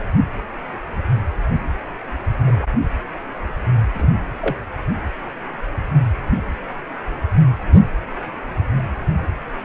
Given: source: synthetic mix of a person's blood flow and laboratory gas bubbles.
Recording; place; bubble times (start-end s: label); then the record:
Doppler ultrasound of blood flow; precordium
2.37-2.67 s: bubbles
3.94-4.07 s: bubbles
4.41-4.56 s: bubbles
From the record:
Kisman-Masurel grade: 122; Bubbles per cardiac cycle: 1 to 2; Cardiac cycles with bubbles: 10 to 50%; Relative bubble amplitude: moderate (0.250 to 0.450); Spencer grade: 2 (many but less than half of the cardiac periods contain bubble signals, singularly or in groups); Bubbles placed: anywhere in the cardiac cycle